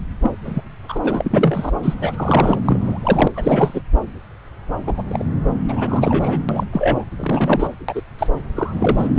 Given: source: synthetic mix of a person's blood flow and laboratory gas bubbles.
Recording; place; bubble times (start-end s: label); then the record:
Doppler ultrasound of blood flow; subclavian vein
0.22-0.30 s: bubbles
0.45-0.61 s: bubbles
0.88-0.99 s: bubbles
1.03-1.71 s: bubbles
1.82-2.58 s: bubbles
2.65-3.28 s: bubbles
3.35-3.82 s: bubbles
4.87-4.94 s: bubbles
4.97-5.04 s: bubbles
5.08-5.23 s: bubbles
5.68-6.42 s: bubbles
6.49-6.63 s: bubbles
6.72-7.04 s: bubbles
7.17-7.70 s: bubbles
7.88-8.02 s: bubbles
8.19-8.27 s: bubbles
8.55-9.09 s: bubbles
9.14-9.19 s: bubbles
From the record:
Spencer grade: 3 (all of the cardiac periods contain showers or single bubble signals, but not dominating or overriding the cardiac motion signals); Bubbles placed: anywhere in the cardiac cycle